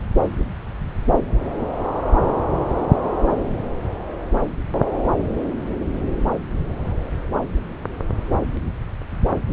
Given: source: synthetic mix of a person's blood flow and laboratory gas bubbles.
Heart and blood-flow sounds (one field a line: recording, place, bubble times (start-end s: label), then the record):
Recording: Doppler ultrasound of blood flow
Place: subclavian vein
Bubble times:
no bubbles
From the record:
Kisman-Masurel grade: 000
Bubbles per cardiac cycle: 0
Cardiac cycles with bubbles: 0%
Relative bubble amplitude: no bubbles discernible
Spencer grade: 0 (complete lack of bubble signals)